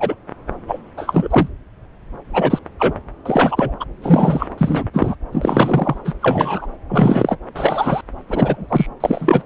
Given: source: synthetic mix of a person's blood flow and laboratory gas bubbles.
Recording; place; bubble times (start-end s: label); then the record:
Doppler ultrasound of blood flow; subclavian vein
0.00-0.16 s: bubbles
0.67-0.79 s: bubbles
0.97-1.48 s: bubbles
2.33-2.59 s: bubbles
2.79-2.94 s: bubbles
3.25-3.77 s: bubbles
3.80-3.85 s: bubbles
4.02-4.48 s: bubbles
4.57-4.83 s: bubbles
4.93-5.15 s: bubbles
5.31-5.97 s: bubbles
6.04-6.13 s: bubbles
6.21-6.67 s: bubbles
6.89-7.36 s: bubbles
7.55-8.01 s: bubbles
8.28-8.87 s: bubbles
9.00-9.42 s: bubbles
From the record:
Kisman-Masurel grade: 233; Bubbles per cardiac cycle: several, 3 to 8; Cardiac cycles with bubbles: 50 to 99%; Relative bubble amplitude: loud (0.450 to 0.775); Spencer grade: 3 (all of the cardiac periods contain showers or single bubble signals, but not dominating or overriding the cardiac motion signals); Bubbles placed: anywhere in the cardiac cycle